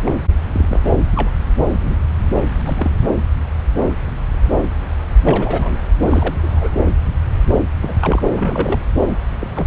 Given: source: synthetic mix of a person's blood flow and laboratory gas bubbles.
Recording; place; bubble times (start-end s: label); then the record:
Doppler ultrasound of blood flow; subclavian vein
0.04-0.14 s: bubbles
0.53-0.80 s: bubbles
1.16-1.30 s: bubbles
1.59-1.95 s: bubbles
2.65-2.95 s: bubbles
3.01-3.07 s: bubbles
5.24-5.78 s: bubbles
6.00-6.35 s: bubbles
6.42-6.69 s: bubbles
7.82-7.94 s: bubbles
8.00-8.21 s: bubbles
8.35-8.80 s: bubbles
9.40-9.47 s: bubbles
9.55-9.66 s: bubbles
From the record:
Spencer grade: 3 (all of the cardiac periods contain showers or single bubble signals, but not dominating or overriding the cardiac motion signals); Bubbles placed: anywhere in the cardiac cycle